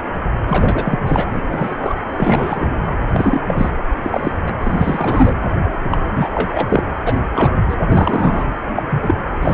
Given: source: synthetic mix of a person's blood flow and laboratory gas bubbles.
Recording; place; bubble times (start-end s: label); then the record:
Doppler ultrasound of blood flow; precordium
0.48-0.99 s: bubbles
1.06-1.46 s: bubbles
1.50-1.75 s: bubbles
1.79-1.95 s: bubbles
2.18-2.80 s: bubbles
2.85-2.95 s: bubbles
3.13-3.40 s: bubbles
3.48-3.70 s: bubbles
4.04-4.32 s: bubbles
4.46-4.53 s: bubbles
4.62-5.33 s: bubbles
5.85-5.99 s: bubbles
6.16-6.82 s: bubbles
7.05-7.20 s: bubbles
7.35-7.54 s: bubbles
7.69-7.75 s: bubbles
7.89-8.46 s: bubbles
8.75-8.83 s: bubbles
8.90-9.14 s: bubbles
9.41-9.54 s: bubbles
From the record:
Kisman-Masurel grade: 243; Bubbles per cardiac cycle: several, 3 to 8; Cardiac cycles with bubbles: 100%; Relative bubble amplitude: loud (0.450 to 0.775); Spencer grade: 3 (all of the cardiac periods contain showers or single bubble signals, but not dominating or overriding the cardiac motion signals); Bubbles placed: anywhere in the cardiac cycle